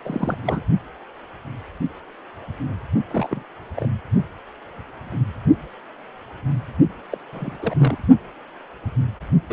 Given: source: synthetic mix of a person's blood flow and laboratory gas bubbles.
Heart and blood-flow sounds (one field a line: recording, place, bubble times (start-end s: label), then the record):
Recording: Doppler ultrasound of blood flow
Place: precordium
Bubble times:
0.04-0.38 s: bubbles
0.43-0.61 s: bubbles
3.10-3.43 s: bubbles
3.76-3.88 s: bubbles
7.12-7.18 s: bubbles
7.33-7.58 s: bubbles
7.62-7.75 s: bubbles
7.78-7.98 s: bubbles
9.49-9.53 s: bubbles
From the record:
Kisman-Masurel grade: 221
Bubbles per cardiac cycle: several, 3 to 8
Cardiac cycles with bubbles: 10 to 50%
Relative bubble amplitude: barely perceptible (0.100 to 0.250)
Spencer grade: 2 (many but less than half of the cardiac periods contain bubble signals, singularly or in groups)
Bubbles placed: only in the low amplitude regions of the cardiac cycle